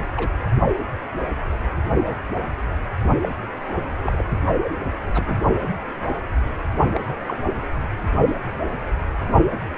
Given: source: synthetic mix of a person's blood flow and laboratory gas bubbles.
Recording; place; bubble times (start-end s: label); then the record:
Doppler ultrasound of blood flow; precordium
0.16-0.29 s: bubbles
3.23-3.29 s: bubbles
4.01-4.25 s: bubbles
5.14-5.35 s: bubbles
6.93-7.16 s: bubbles
7.26-7.37 s: bubbles
From the record:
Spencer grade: 2 (many but less than half of the cardiac periods contain bubble signals, singularly or in groups); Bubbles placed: only in the low amplitude regions of the cardiac cycle